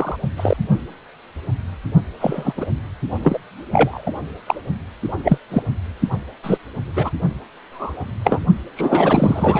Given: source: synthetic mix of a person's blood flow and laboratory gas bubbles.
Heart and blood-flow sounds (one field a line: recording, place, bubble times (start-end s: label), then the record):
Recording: Doppler ultrasound of blood flow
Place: precordium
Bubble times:
0.00-0.16 s: bubbles
0.36-0.56 s: bubbles
2.19-2.53 s: bubbles
2.56-2.65 s: bubbles
3.22-3.38 s: bubbles
3.72-4.12 s: bubbles
4.46-4.55 s: bubbles
5.23-5.38 s: bubbles
5.51-5.62 s: bubbles
6.43-6.58 s: bubbles
6.87-7.10 s: bubbles
7.71-8.05 s: bubbles
8.24-8.40 s: bubbles
8.76-9.60 s: bubbles
From the record:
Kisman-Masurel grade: 233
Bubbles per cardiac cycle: several, 3 to 8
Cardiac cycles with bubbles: 50 to 99%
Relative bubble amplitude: loud (0.450 to 0.775)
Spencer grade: 3 (all of the cardiac periods contain showers or single bubble signals, but not dominating or overriding the cardiac motion signals)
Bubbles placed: only in the low amplitude regions of the cardiac cycle